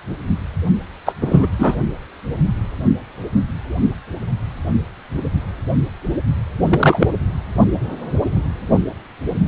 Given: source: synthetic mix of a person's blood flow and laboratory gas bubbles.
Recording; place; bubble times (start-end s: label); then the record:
Doppler ultrasound of blood flow; precordium
1.06-1.13 s: bubbles
1.21-1.47 s: bubbles
1.58-1.75 s: bubbles
6.68-7.07 s: bubbles
From the record:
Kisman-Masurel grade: 223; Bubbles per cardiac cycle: several, 3 to 8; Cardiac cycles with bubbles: 10 to 50%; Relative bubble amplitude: loud (0.450 to 0.775); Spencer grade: 2 (many but less than half of the cardiac periods contain bubble signals, singularly or in groups); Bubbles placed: only in the low amplitude regions of the cardiac cycle